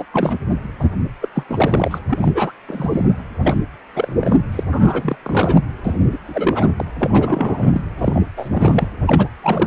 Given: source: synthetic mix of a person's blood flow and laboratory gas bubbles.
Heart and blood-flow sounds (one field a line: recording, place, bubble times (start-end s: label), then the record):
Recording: Doppler ultrasound of blood flow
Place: precordium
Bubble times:
0.00-0.05 s: bubbles
0.13-0.36 s: bubbles
0.80-0.84 s: bubbles
1.21-1.29 s: bubbles
1.35-1.43 s: bubbles
1.48-1.99 s: bubbles
2.10-2.52 s: bubbles
2.68-3.06 s: bubbles
3.42-3.56 s: bubbles
3.94-4.40 s: bubbles
4.52-4.64 s: bubbles
4.72-5.17 s: bubbles
5.23-5.61 s: bubbles
5.85-5.93 s: bubbles
6.12-6.18 s: bubbles
6.25-6.73 s: bubbles
6.77-6.85 s: bubbles
6.99-7.82 s: bubbles
7.97-8.24 s: bubbles
8.37-8.87 s: bubbles
9.07-9.29 s: bubbles
9.42-9.67 s: bubbles
From the record:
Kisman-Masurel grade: 342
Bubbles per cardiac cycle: rolling drumbeat, 9 or more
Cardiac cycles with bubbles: 100%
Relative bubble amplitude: moderate (0.250 to 0.450)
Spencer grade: 3 (all of the cardiac periods contain showers or single bubble signals, but not dominating or overriding the cardiac motion signals)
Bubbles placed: anywhere in the cardiac cycle